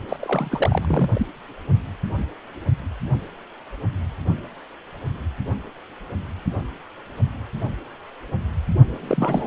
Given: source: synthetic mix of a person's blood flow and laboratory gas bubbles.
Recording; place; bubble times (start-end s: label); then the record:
Doppler ultrasound of blood flow; precordium
0.08-0.16 s: bubbles
0.19-1.10 s: bubbles
1.13-1.26 s: bubbles
9.00-9.47 s: bubbles
From the record:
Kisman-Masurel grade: 332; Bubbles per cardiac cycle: rolling drumbeat, 9 or more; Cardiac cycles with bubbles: 50 to 99%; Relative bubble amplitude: moderate (0.250 to 0.450); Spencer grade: 3 (all of the cardiac periods contain showers or single bubble signals, but not dominating or overriding the cardiac motion signals); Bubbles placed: only in the low amplitude regions of the cardiac cycle